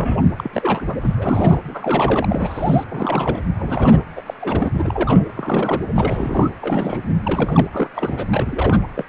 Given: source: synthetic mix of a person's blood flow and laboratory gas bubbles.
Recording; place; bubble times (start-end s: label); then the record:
Doppler ultrasound of blood flow; precordium
0.00-0.23 s: bubbles
0.37-0.96 s: bubbles
1.01-1.60 s: bubbles
1.68-2.84 s: bubbles
2.89-3.43 s: bubbles
3.59-4.04 s: bubbles
4.15-4.22 s: bubbles
4.26-4.34 s: bubbles
4.40-5.24 s: bubbles
5.34-5.81 s: bubbles
5.95-6.50 s: bubbles
6.61-7.01 s: bubbles
7.23-7.69 s: bubbles
7.72-7.90 s: bubbles
7.94-8.25 s: bubbles
8.31-8.82 s: bubbles
8.96-9.04 s: bubbles
From the record:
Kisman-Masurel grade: 342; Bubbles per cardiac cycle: rolling drumbeat, 9 or more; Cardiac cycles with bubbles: 100%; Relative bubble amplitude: moderate (0.250 to 0.450); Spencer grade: 3 (all of the cardiac periods contain showers or single bubble signals, but not dominating or overriding the cardiac motion signals); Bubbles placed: anywhere in the cardiac cycle